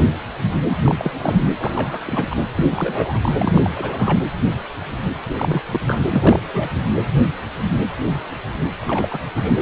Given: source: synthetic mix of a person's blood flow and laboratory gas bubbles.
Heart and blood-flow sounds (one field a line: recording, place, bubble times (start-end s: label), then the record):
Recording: Doppler ultrasound of blood flow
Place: precordium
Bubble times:
0.67-0.77 s: bubbles
0.82-0.95 s: bubbles
0.98-1.11 s: bubbles
1.15-1.45 s: bubbles
1.57-2.25 s: bubbles
2.30-2.37 s: bubbles
2.55-3.32 s: bubbles
3.36-3.71 s: bubbles
3.75-4.20 s: bubbles
5.29-5.63 s: bubbles
5.71-5.81 s: bubbles
5.85-6.04 s: bubbles
6.11-6.40 s: bubbles
6.54-6.69 s: bubbles
8.80-9.19 s: bubbles
9.35-9.54 s: bubbles
From the record:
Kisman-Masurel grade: 332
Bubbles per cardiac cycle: rolling drumbeat, 9 or more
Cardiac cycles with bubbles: 50 to 99%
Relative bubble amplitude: moderate (0.250 to 0.450)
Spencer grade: 3 (all of the cardiac periods contain showers or single bubble signals, but not dominating or overriding the cardiac motion signals)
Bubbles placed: anywhere in the cardiac cycle